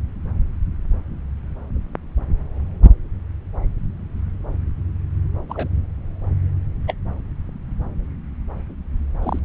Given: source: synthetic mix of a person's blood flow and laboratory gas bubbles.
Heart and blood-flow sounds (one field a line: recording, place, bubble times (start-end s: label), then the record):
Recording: Doppler ultrasound of blood flow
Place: subclavian vein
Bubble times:
5.49-5.68 s: bubbles
6.87-6.95 s: bubbles
9.23-9.39 s: bubbles
From the record:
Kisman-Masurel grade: 122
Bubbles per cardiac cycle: 1 to 2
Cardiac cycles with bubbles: 10 to 50%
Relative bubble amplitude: moderate (0.250 to 0.450)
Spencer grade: 2 (many but less than half of the cardiac periods contain bubble signals, singularly or in groups)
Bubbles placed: anywhere in the cardiac cycle